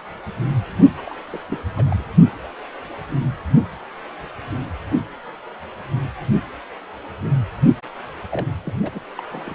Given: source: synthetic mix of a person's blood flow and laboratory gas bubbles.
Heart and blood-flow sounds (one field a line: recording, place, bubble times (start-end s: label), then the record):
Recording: Doppler ultrasound of blood flow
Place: precordium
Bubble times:
0.96-1.02 s: bubbles
1.05-1.15 s: bubbles
1.27-1.44 s: bubbles
1.49-1.63 s: bubbles
1.76-2.03 s: bubbles
2.06-2.08 s: bubbles
8.29-8.46 s: bubbles
8.63-8.79 s: bubbles
8.82-9.01 s: bubbles
9.17-9.22 s: bubbles
9.29-9.55 s: bubbles
From the record:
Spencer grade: 2 (many but less than half of the cardiac periods contain bubble signals, singularly or in groups)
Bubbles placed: anywhere in the cardiac cycle